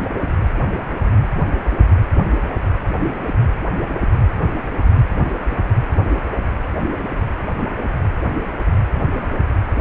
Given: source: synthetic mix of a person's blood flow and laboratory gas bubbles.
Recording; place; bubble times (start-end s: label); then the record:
Doppler ultrasound of blood flow; precordium
no bubbles
From the record:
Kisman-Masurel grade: 000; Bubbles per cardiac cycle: 0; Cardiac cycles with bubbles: 0%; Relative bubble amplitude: no bubbles discernible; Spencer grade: 0 (complete lack of bubble signals)